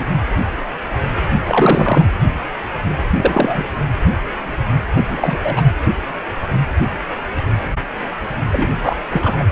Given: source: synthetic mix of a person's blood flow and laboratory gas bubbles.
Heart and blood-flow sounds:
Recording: Doppler ultrasound of blood flow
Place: precordium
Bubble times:
0.00-0.11 s: bubbles
1.45-2.06 s: bubbles
3.14-3.64 s: bubbles
4.95-5.38 s: bubbles
5.43-5.62 s: bubbles
8.52-8.70 s: bubbles
8.74-8.96 s: bubbles
9.10-9.44 s: bubbles
From the record:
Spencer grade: 2 (many but less than half of the cardiac periods contain bubble signals, singularly or in groups)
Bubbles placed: anywhere in the cardiac cycle

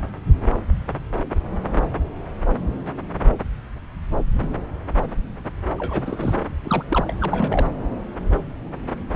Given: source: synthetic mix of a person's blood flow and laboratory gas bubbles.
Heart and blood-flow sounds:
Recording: Doppler ultrasound of blood flow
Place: subclavian vein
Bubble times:
5.78-6.33 s: bubbles
6.64-6.84 s: bubbles
6.90-7.14 s: bubbles
7.20-7.66 s: bubbles
From the record:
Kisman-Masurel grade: 222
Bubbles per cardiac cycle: several, 3 to 8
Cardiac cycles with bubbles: 10 to 50%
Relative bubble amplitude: moderate (0.250 to 0.450)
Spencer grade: 2 (many but less than half of the cardiac periods contain bubble signals, singularly or in groups)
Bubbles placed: anywhere in the cardiac cycle

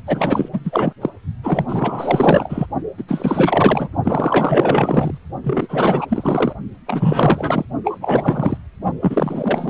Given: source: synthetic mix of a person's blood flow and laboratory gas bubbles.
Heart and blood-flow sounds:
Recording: Doppler ultrasound of blood flow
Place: precordium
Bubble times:
0.06-0.49 s: bubbles
0.53-0.61 s: bubbles
0.64-0.93 s: bubbles
1.01-1.09 s: bubbles
1.43-2.66 s: bubbles
2.97-3.04 s: bubbles
3.08-3.89 s: bubbles
4.04-5.18 s: bubbles
5.44-6.53 s: bubbles
6.87-7.65 s: bubbles
7.84-7.98 s: bubbles
8.00-8.57 s: bubbles
9.01-9.70 s: bubbles
From the record:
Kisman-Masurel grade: 444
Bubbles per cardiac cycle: continuous sound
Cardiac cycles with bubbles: 100%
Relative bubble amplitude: maximal (0.775 to 0.999)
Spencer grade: 4 (maximum detectable bubble signal sounding continuously throughout systole and diastole of every cardiac period, and overriding the amplitude of the normal cardiac signals)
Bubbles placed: only in the low amplitude regions of the cardiac cycle

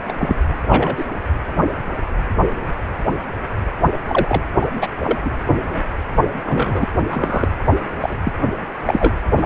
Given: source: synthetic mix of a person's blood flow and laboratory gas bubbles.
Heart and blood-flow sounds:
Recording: Doppler ultrasound of blood flow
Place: precordium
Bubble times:
0.00-0.45 s: bubbles
0.69-1.05 s: bubbles
4.07-4.43 s: bubbles
4.61-4.67 s: bubbles
4.74-4.87 s: bubbles
5.00-5.19 s: bubbles
5.24-5.31 s: bubbles
6.46-6.87 s: bubbles
7.07-7.48 s: bubbles
8.00-8.16 s: bubbles
8.25-8.33 s: bubbles
8.85-9.12 s: bubbles
9.38-9.46 s: bubbles
From the record:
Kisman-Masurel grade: 233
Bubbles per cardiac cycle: several, 3 to 8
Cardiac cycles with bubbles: 50 to 99%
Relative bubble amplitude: loud (0.450 to 0.775)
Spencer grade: 3 (all of the cardiac periods contain showers or single bubble signals, but not dominating or overriding the cardiac motion signals)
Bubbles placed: anywhere in the cardiac cycle

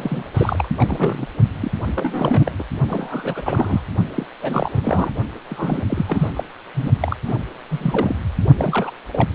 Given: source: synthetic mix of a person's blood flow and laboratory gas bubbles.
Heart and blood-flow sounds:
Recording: Doppler ultrasound of blood flow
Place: precordium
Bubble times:
0.00-0.24 s: bubbles
0.34-0.68 s: bubbles
0.75-1.27 s: bubbles
1.61-1.72 s: bubbles
1.95-2.52 s: bubbles
2.58-2.63 s: bubbles
2.88-3.42 s: bubbles
3.45-3.82 s: bubbles
4.16-4.26 s: bubbles
4.42-5.11 s: bubbles
5.50-5.84 s: bubbles
5.88-6.29 s: bubbles
6.36-6.44 s: bubbles
6.74-6.91 s: bubbles
7.00-7.17 s: bubbles
7.27-7.35 s: bubbles
7.71-8.15 s: bubbles
8.59-8.90 s: bubbles
9.13-9.28 s: bubbles
From the record:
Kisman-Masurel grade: 342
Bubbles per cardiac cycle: rolling drumbeat, 9 or more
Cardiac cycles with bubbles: 100%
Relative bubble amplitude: moderate (0.250 to 0.450)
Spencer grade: 3 (all of the cardiac periods contain showers or single bubble signals, but not dominating or overriding the cardiac motion signals)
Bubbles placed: only in the low amplitude regions of the cardiac cycle

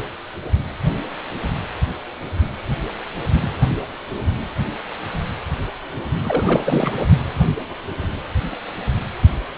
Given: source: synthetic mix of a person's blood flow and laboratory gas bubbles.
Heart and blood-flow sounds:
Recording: Doppler ultrasound of blood flow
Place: precordium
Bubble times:
6.24-6.97 s: bubbles
From the record:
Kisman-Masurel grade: 212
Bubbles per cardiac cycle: several, 3 to 8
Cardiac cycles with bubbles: 1 to 10%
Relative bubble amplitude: moderate (0.250 to 0.450)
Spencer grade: 1 (occasional bubble signal discernible with the cardiac motion signal, with majority of cardiac periods free of bubbles)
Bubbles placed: anywhere in the cardiac cycle

